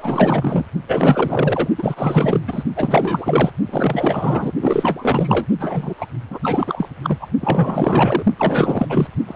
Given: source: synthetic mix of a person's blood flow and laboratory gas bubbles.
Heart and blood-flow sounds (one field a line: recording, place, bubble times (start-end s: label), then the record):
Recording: Doppler ultrasound of blood flow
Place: precordium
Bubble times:
0.00-0.66 s: bubbles
0.88-1.68 s: bubbles
1.78-2.41 s: bubbles
2.47-2.63 s: bubbles
2.75-3.50 s: bubbles
3.66-4.52 s: bubbles
4.60-5.46 s: bubbles
5.58-5.94 s: bubbles
5.97-6.06 s: bubbles
6.30-6.38 s: bubbles
6.42-6.89 s: bubbles
7.02-7.27 s: bubbles
7.41-8.24 s: bubbles
8.38-9.07 s: bubbles
9.27-9.36 s: bubbles
From the record:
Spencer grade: 4 (maximum detectable bubble signal sounding continuously throughout systole and diastole of every cardiac period, and overriding the amplitude of the normal cardiac signals)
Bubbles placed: only in the low amplitude regions of the cardiac cycle